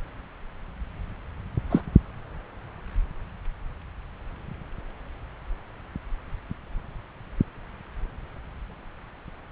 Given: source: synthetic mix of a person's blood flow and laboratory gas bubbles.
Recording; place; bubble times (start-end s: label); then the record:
Doppler ultrasound of blood flow; subclavian vein
1.69-1.81 s: bubbles
From the record:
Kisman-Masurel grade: 123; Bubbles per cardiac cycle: 1 to 2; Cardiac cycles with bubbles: 10 to 50%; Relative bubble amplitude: loud (0.450 to 0.775); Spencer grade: 2 (many but less than half of the cardiac periods contain bubble signals, singularly or in groups); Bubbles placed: anywhere in the cardiac cycle